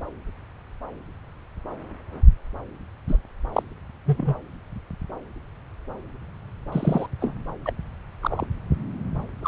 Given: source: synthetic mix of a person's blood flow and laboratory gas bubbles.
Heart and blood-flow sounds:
Doppler ultrasound of blood flow; subclavian vein
3.08-3.17 s: bubbles
3.53-3.62 s: bubbles
4.05-4.34 s: bubbles
6.72-7.07 s: bubbles
7.20-7.34 s: bubbles
7.66-7.73 s: bubbles
8.22-8.46 s: bubbles
9.42-9.48 s: bubbles
From the record:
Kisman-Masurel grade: 122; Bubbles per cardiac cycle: 1 to 2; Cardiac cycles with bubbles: 10 to 50%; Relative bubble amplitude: moderate (0.250 to 0.450); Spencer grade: 2 (many but less than half of the cardiac periods contain bubble signals, singularly or in groups); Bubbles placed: anywhere in the cardiac cycle

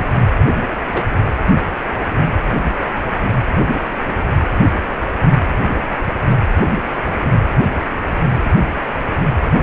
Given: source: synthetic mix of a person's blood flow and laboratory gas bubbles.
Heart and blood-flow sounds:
Doppler ultrasound of blood flow; precordium
0.88-1.05 s: bubbles
From the record:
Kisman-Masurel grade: 111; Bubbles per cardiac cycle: 1 to 2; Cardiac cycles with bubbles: 1 to 10%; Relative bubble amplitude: barely perceptible (0.100 to 0.250); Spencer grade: 1 (occasional bubble signal discernible with the cardiac motion signal, with majority of cardiac periods free of bubbles); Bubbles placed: anywhere in the cardiac cycle

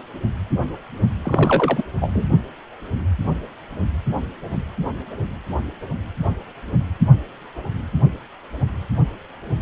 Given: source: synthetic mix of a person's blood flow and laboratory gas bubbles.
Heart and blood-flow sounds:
Doppler ultrasound of blood flow; precordium
1.22-1.85 s: bubbles
1.94-2.27 s: bubbles
From the record:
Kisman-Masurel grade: 212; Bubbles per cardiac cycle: several, 3 to 8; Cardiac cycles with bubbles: 1 to 10%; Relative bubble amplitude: moderate (0.250 to 0.450); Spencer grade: 1 (occasional bubble signal discernible with the cardiac motion signal, with majority of cardiac periods free of bubbles); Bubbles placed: only in the low amplitude regions of the cardiac cycle

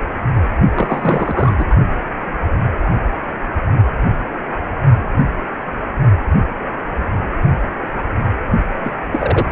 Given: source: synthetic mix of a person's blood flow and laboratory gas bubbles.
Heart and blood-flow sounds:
Doppler ultrasound of blood flow; precordium
0.76-1.54 s: bubbles
1.58-1.65 s: bubbles
8.83-8.95 s: bubbles
9.12-9.46 s: bubbles
From the record:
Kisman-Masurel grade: 222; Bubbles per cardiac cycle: several, 3 to 8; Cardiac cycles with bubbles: 10 to 50%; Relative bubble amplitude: moderate (0.250 to 0.450); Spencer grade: 2 (many but less than half of the cardiac periods contain bubble signals, singularly or in groups); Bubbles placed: only in the low amplitude regions of the cardiac cycle

